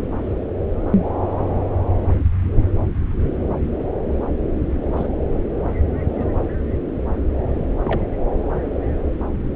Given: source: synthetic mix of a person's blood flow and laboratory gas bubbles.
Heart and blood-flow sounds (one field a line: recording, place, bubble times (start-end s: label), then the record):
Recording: Doppler ultrasound of blood flow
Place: subclavian vein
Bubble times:
4.96-5.07 s: bubbles
6.15-6.28 s: bubbles
7.85-8.00 s: bubbles
From the record:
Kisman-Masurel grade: 122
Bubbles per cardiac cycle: 1 to 2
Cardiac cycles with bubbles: 10 to 50%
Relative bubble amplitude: moderate (0.250 to 0.450)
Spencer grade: 2 (many but less than half of the cardiac periods contain bubble signals, singularly or in groups)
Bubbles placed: anywhere in the cardiac cycle